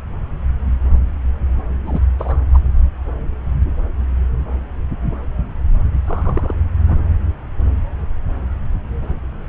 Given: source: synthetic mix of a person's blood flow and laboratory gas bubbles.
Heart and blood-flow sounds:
Doppler ultrasound of blood flow; subclavian vein
1.86-2.00 s: bubbles
2.18-2.37 s: bubbles
2.52-2.58 s: bubbles
6.06-6.54 s: bubbles
6.88-6.96 s: bubbles
From the record:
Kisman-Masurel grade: 222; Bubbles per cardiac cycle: several, 3 to 8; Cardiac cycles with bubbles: 10 to 50%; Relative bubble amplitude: moderate (0.250 to 0.450); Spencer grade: 2 (many but less than half of the cardiac periods contain bubble signals, singularly or in groups); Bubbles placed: anywhere in the cardiac cycle

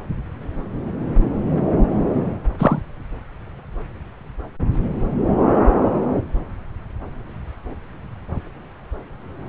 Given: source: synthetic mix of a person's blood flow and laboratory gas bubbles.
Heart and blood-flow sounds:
Doppler ultrasound of blood flow; subclavian vein
2.59-2.80 s: bubbles
From the record:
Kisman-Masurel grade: 113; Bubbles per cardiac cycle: 1 to 2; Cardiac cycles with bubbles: 1 to 10%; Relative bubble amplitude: loud (0.450 to 0.775); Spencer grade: 1 (occasional bubble signal discernible with the cardiac motion signal, with majority of cardiac periods free of bubbles); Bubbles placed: anywhere in the cardiac cycle

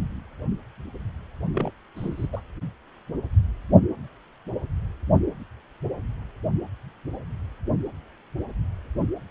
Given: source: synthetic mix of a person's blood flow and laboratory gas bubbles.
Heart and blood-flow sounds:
Doppler ultrasound of blood flow; precordium
1.53-1.71 s: bubbles
1.96-2.27 s: bubbles
2.33-2.40 s: bubbles
From the record:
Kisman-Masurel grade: 211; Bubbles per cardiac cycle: several, 3 to 8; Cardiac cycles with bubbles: 1 to 10%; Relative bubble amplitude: barely perceptible (0.100 to 0.250); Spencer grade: 1 (occasional bubble signal discernible with the cardiac motion signal, with majority of cardiac periods free of bubbles); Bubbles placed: anywhere in the cardiac cycle

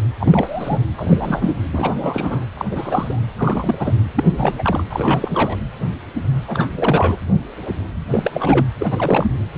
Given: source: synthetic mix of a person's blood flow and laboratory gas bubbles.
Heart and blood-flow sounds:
Doppler ultrasound of blood flow; precordium
0.19-0.78 s: bubbles
0.96-1.55 s: bubbles
1.73-2.47 s: bubbles
2.54-2.65 s: bubbles
2.71-3.22 s: bubbles
3.38-3.94 s: bubbles
4.16-4.83 s: bubbles
4.90-5.58 s: bubbles
6.47-6.69 s: bubbles
6.72-7.18 s: bubbles
8.11-8.31 s: bubbles
8.34-8.65 s: bubbles
8.79-9.31 s: bubbles
9.54-9.58 s: bubbles
From the record:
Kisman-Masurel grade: 332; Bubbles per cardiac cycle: rolling drumbeat, 9 or more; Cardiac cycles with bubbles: 50 to 99%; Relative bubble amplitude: moderate (0.250 to 0.450); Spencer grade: 3 (all of the cardiac periods contain showers or single bubble signals, but not dominating or overriding the cardiac motion signals); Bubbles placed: anywhere in the cardiac cycle

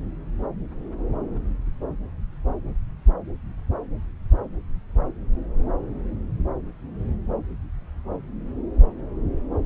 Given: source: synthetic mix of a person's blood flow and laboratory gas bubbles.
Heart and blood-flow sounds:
Doppler ultrasound of blood flow; subclavian vein
no bubbles
From the record:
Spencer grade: 0 (complete lack of bubble signals)

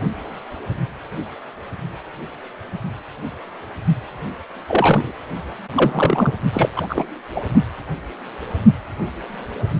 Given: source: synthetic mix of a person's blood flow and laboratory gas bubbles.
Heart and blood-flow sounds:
Doppler ultrasound of blood flow; precordium
4.67-5.12 s: bubbles
5.75-6.33 s: bubbles
6.53-6.69 s: bubbles
6.76-7.08 s: bubbles
7.34-7.41 s: bubbles
From the record:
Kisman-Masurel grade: 223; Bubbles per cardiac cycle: several, 3 to 8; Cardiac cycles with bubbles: 10 to 50%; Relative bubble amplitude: loud (0.450 to 0.775); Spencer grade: 2 (many but less than half of the cardiac periods contain bubble signals, singularly or in groups); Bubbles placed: only in the low amplitude regions of the cardiac cycle

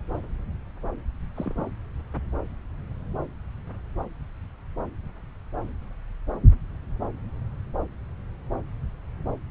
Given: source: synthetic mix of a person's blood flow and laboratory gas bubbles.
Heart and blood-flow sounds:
Doppler ultrasound of blood flow; subclavian vein
1.36-1.66 s: bubbles
From the record:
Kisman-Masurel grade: 111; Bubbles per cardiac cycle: 1 to 2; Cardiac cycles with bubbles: 1 to 10%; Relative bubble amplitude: barely perceptible (0.100 to 0.250); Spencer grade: 1 (occasional bubble signal discernible with the cardiac motion signal, with majority of cardiac periods free of bubbles); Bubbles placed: anywhere in the cardiac cycle

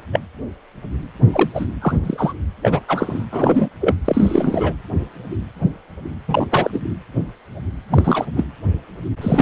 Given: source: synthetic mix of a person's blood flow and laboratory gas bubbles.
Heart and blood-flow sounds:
Doppler ultrasound of blood flow; precordium
0.12-0.20 s: bubbles
1.33-1.49 s: bubbles
1.54-1.66 s: bubbles
1.81-1.99 s: bubbles
2.03-2.33 s: bubbles
2.62-2.80 s: bubbles
2.88-3.26 s: bubbles
3.31-3.69 s: bubbles
3.80-3.96 s: bubbles
4.04-4.73 s: bubbles
6.27-6.47 s: bubbles
6.51-6.80 s: bubbles
7.89-8.26 s: bubbles
8.37-8.45 s: bubbles
9.21-9.42 s: bubbles
From the record:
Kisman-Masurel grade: 233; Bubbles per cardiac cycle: several, 3 to 8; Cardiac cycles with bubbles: 50 to 99%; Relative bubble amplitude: loud (0.450 to 0.775); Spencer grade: 3 (all of the cardiac periods contain showers or single bubble signals, but not dominating or overriding the cardiac motion signals); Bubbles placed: anywhere in the cardiac cycle

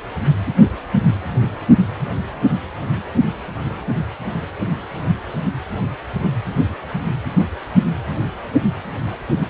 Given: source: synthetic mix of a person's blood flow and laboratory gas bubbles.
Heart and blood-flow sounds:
Doppler ultrasound of blood flow; precordium
6.19-6.31 s: bubbles
From the record:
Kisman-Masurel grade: 111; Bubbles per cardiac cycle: 1 to 2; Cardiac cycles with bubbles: 1 to 10%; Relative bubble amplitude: barely perceptible (0.100 to 0.250); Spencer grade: 1 (occasional bubble signal discernible with the cardiac motion signal, with majority of cardiac periods free of bubbles); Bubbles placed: only in the low amplitude regions of the cardiac cycle

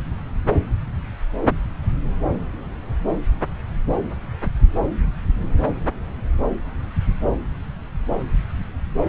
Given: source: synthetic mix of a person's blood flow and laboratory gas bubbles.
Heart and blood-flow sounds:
Doppler ultrasound of blood flow; subclavian vein
no bubbles
From the record:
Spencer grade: 0 (complete lack of bubble signals)

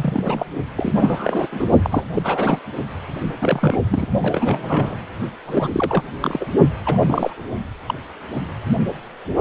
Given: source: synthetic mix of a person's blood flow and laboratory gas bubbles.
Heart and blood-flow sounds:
Doppler ultrasound of blood flow; precordium
0.00-0.45 s: bubbles
0.75-1.47 s: bubbles
1.52-1.67 s: bubbles
1.82-2.04 s: bubbles
2.14-2.60 s: bubbles
3.41-4.05 s: bubbles
4.21-4.97 s: bubbles
5.46-6.03 s: bubbles
6.22-6.46 s: bubbles
6.85-7.44 s: bubbles
7.87-7.94 s: bubbles
From the record:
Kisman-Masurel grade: 332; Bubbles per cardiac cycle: rolling drumbeat, 9 or more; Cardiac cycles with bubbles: 50 to 99%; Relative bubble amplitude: moderate (0.250 to 0.450); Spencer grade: 3 (all of the cardiac periods contain showers or single bubble signals, but not dominating or overriding the cardiac motion signals); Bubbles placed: only in the low amplitude regions of the cardiac cycle

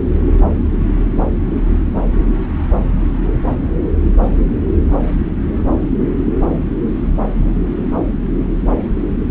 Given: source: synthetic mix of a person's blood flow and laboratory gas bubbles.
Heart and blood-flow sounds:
Doppler ultrasound of blood flow; subclavian vein
0.49-0.54 s: bubbles
From the record:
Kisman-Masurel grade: 111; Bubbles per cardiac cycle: 1 to 2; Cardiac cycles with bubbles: 1 to 10%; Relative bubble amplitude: barely perceptible (0.100 to 0.250); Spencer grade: 1 (occasional bubble signal discernible with the cardiac motion signal, with majority of cardiac periods free of bubbles); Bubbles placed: anywhere in the cardiac cycle

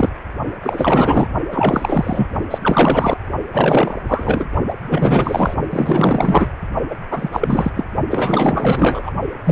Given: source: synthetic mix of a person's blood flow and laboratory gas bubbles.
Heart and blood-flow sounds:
Doppler ultrasound of blood flow; precordium
0.00-0.10 s: bubbles
0.62-1.27 s: bubbles
1.50-2.28 s: bubbles
2.50-2.58 s: bubbles
2.61-3.17 s: bubbles
3.52-3.96 s: bubbles
4.08-4.45 s: bubbles
4.68-4.74 s: bubbles
4.83-5.55 s: bubbles
5.71-6.47 s: bubbles
6.90-6.96 s: bubbles
7.11-7.71 s: bubbles
7.75-7.87 s: bubbles
8.10-9.11 s: bubbles
9.44-9.52 s: bubbles
From the record:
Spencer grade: 4 (maximum detectable bubble signal sounding continuously throughout systole and diastole of every cardiac period, and overriding the amplitude of the normal cardiac signals); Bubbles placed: only in the low amplitude regions of the cardiac cycle

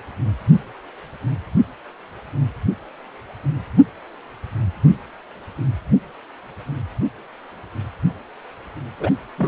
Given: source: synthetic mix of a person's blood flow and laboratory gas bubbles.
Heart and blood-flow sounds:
Doppler ultrasound of blood flow; precordium
8.99-9.10 s: bubbles
9.38-9.48 s: bubbles
From the record:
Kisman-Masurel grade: 212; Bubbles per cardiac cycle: several, 3 to 8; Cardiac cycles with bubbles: 1 to 10%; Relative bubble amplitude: moderate (0.250 to 0.450); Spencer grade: 1 (occasional bubble signal discernible with the cardiac motion signal, with majority of cardiac periods free of bubbles); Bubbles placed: anywhere in the cardiac cycle

